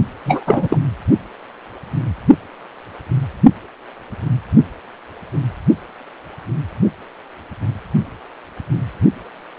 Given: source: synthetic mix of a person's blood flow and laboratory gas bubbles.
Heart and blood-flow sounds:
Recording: Doppler ultrasound of blood flow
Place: precordium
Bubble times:
0.26-0.78 s: bubbles
From the record:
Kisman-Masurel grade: 213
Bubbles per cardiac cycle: several, 3 to 8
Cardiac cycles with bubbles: 1 to 10%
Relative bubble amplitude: loud (0.450 to 0.775)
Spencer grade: 1 (occasional bubble signal discernible with the cardiac motion signal, with majority of cardiac periods free of bubbles)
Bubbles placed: only in the low amplitude regions of the cardiac cycle

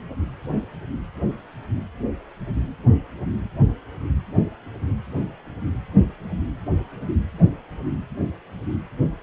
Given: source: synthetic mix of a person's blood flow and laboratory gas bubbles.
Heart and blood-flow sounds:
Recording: Doppler ultrasound of blood flow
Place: precordium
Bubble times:
no bubbles
From the record:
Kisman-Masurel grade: 000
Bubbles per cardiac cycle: 0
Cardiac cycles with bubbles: 0%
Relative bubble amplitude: no bubbles discernible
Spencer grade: 0 (complete lack of bubble signals)

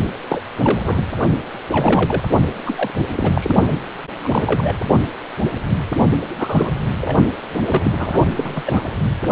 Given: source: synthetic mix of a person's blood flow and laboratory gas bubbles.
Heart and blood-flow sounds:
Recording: Doppler ultrasound of blood flow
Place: precordium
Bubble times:
0.29-0.39 s: bubbles
0.63-0.81 s: bubbles
0.84-1.03 s: bubbles
1.72-2.22 s: bubbles
2.65-2.91 s: bubbles
3.17-3.56 s: bubbles
4.21-4.75 s: bubbles
6.36-6.72 s: bubbles
7.01-7.17 s: bubbles
7.53-8.20 s: bubbles
8.32-8.63 s: bubbles
8.66-8.88 s: bubbles
From the record:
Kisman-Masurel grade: 232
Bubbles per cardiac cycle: several, 3 to 8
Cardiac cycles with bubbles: 50 to 99%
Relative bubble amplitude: moderate (0.250 to 0.450)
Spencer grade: 3 (all of the cardiac periods contain showers or single bubble signals, but not dominating or overriding the cardiac motion signals)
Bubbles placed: only in the low amplitude regions of the cardiac cycle

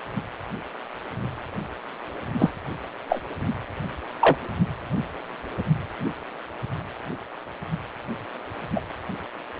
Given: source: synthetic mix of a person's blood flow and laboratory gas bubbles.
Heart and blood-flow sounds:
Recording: Doppler ultrasound of blood flow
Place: precordium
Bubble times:
2.39-2.52 s: bubbles
3.09-3.21 s: bubbles
4.21-4.36 s: bubbles
8.75-8.80 s: bubbles
From the record:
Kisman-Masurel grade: 122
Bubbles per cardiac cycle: 1 to 2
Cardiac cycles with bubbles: 10 to 50%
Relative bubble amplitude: moderate (0.250 to 0.450)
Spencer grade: 2 (many but less than half of the cardiac periods contain bubble signals, singularly or in groups)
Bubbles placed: anywhere in the cardiac cycle

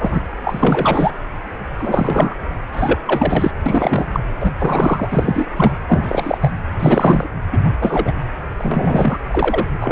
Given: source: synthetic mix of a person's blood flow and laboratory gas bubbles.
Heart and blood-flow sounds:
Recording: Doppler ultrasound of blood flow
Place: precordium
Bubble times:
0.00-0.21 s: bubbles
0.45-1.11 s: bubbles
1.78-2.35 s: bubbles
2.73-3.00 s: bubbles
3.06-3.51 s: bubbles
3.66-4.05 s: bubbles
4.13-4.20 s: bubbles
4.41-4.53 s: bubbles
4.58-5.08 s: bubbles
5.12-5.49 s: bubbles
5.55-5.74 s: bubbles
5.88-6.51 s: bubbles
6.79-7.29 s: bubbles
7.52-7.59 s: bubbles
7.64-7.71 s: bubbles
7.79-8.12 s: bubbles
8.58-9.18 s: bubbles
9.29-9.66 s: bubbles
9.80-9.92 s: bubbles
From the record:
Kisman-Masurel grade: 343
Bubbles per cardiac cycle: rolling drumbeat, 9 or more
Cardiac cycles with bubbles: 100%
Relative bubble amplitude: loud (0.450 to 0.775)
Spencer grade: 3 (all of the cardiac periods contain showers or single bubble signals, but not dominating or overriding the cardiac motion signals)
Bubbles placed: anywhere in the cardiac cycle

